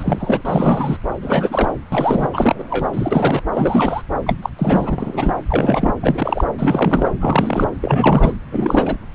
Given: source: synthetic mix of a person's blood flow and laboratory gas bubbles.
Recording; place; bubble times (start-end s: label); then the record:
Doppler ultrasound of blood flow; subclavian vein
0.00-0.42 s: bubbles
0.45-0.98 s: bubbles
1.21-1.69 s: bubbles
1.92-2.28 s: bubbles
2.33-2.55 s: bubbles
2.58-2.65 s: bubbles
2.70-2.88 s: bubbles
2.93-3.42 s: bubbles
3.53-4.03 s: bubbles
4.26-4.36 s: bubbles
4.42-4.50 s: bubbles
4.58-5.34 s: bubbles
5.49-5.95 s: bubbles
6.03-6.45 s: bubbles
6.58-7.12 s: bubbles
7.20-7.71 s: bubbles
7.81-8.32 s: bubbles
8.52-8.97 s: bubbles
From the record:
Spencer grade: 3 (all of the cardiac periods contain showers or single bubble signals, but not dominating or overriding the cardiac motion signals); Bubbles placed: anywhere in the cardiac cycle